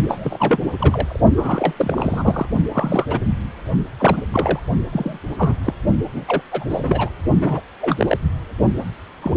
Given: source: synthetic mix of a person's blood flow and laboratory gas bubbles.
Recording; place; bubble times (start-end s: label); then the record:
Doppler ultrasound of blood flow; precordium
0.08-0.59 s: bubbles
0.77-1.21 s: bubbles
1.36-1.74 s: bubbles
1.77-2.46 s: bubbles
2.72-3.20 s: bubbles
3.99-4.22 s: bubbles
4.32-4.59 s: bubbles
4.92-5.19 s: bubbles
5.38-5.55 s: bubbles
5.64-5.74 s: bubbles
6.13-6.42 s: bubbles
6.51-6.64 s: bubbles
6.70-7.09 s: bubbles
7.41-7.60 s: bubbles
7.81-8.18 s: bubbles
9.22-9.37 s: bubbles
From the record:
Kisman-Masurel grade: 242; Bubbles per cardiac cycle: several, 3 to 8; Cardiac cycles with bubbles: 100%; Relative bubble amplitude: moderate (0.250 to 0.450); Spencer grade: 3 (all of the cardiac periods contain showers or single bubble signals, but not dominating or overriding the cardiac motion signals); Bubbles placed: only in the low amplitude regions of the cardiac cycle